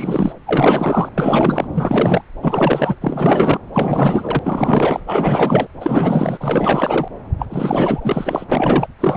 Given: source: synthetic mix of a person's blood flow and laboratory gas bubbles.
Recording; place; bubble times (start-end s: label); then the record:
Doppler ultrasound of blood flow; subclavian vein
0.00-0.33 s: bubbles
0.46-1.09 s: bubbles
1.18-1.67 s: bubbles
1.74-2.22 s: bubbles
2.40-2.96 s: bubbles
3.01-3.59 s: bubbles
3.74-4.39 s: bubbles
4.44-5.00 s: bubbles
5.07-5.67 s: bubbles
5.80-7.08 s: bubbles
7.39-7.46 s: bubbles
7.50-8.44 s: bubbles
8.51-8.87 s: bubbles
9.00-9.17 s: bubbles
From the record:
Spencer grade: 4 (maximum detectable bubble signal sounding continuously throughout systole and diastole of every cardiac period, and overriding the amplitude of the normal cardiac signals); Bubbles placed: anywhere in the cardiac cycle